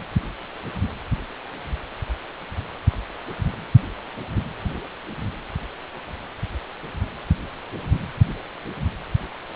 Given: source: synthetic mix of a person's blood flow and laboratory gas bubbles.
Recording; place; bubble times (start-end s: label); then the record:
Doppler ultrasound of blood flow; precordium
no bubbles
From the record:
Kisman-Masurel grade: 000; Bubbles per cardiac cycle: 0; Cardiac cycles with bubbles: 0%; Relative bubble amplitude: no bubbles discernible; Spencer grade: 0 (complete lack of bubble signals)